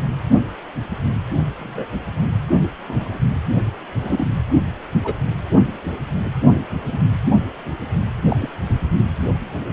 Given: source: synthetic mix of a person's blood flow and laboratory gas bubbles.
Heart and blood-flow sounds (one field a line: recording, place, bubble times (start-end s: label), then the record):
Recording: Doppler ultrasound of blood flow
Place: precordium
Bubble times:
1.59-1.85 s: bubbles
2.87-3.19 s: bubbles
4.00-4.27 s: bubbles
5.03-5.15 s: bubbles
6.92-7.00 s: bubbles
8.29-8.50 s: bubbles
From the record:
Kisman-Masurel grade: 122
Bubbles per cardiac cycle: 1 to 2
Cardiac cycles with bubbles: 10 to 50%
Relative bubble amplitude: moderate (0.250 to 0.450)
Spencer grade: 2 (many but less than half of the cardiac periods contain bubble signals, singularly or in groups)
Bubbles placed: only in the low amplitude regions of the cardiac cycle